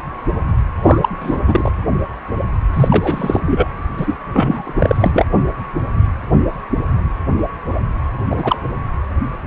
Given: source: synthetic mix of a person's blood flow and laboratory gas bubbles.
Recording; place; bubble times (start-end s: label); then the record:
Doppler ultrasound of blood flow; precordium
0.84-1.09 s: bubbles
1.20-1.41 s: bubbles
1.47-1.70 s: bubbles
2.74-3.41 s: bubbles
3.46-3.68 s: bubbles
3.97-4.15 s: bubbles
4.33-4.73 s: bubbles
4.79-5.11 s: bubbles
5.13-5.26 s: bubbles
8.29-8.35 s: bubbles
8.38-8.56 s: bubbles
From the record:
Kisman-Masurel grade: 223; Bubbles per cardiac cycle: several, 3 to 8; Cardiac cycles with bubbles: 10 to 50%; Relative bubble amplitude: loud (0.450 to 0.775); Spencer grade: 2 (many but less than half of the cardiac periods contain bubble signals, singularly or in groups); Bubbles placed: anywhere in the cardiac cycle